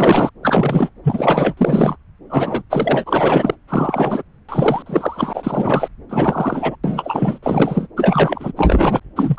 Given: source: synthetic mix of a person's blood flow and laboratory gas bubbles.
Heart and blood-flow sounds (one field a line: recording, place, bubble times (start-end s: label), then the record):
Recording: Doppler ultrasound of blood flow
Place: subclavian vein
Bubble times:
0.00-0.30 s: bubbles
0.42-0.89 s: bubbles
1.03-1.54 s: bubbles
1.57-1.96 s: bubbles
2.29-2.62 s: bubbles
2.69-3.56 s: bubbles
3.68-4.22 s: bubbles
4.49-4.83 s: bubbles
4.86-5.88 s: bubbles
6.09-6.75 s: bubbles
6.83-7.39 s: bubbles
7.43-7.88 s: bubbles
7.96-8.52 s: bubbles
8.56-9.00 s: bubbles
9.16-9.39 s: bubbles
From the record:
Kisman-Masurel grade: 343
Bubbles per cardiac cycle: rolling drumbeat, 9 or more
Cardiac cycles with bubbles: 100%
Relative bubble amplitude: loud (0.450 to 0.775)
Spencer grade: 3 (all of the cardiac periods contain showers or single bubble signals, but not dominating or overriding the cardiac motion signals)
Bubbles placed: anywhere in the cardiac cycle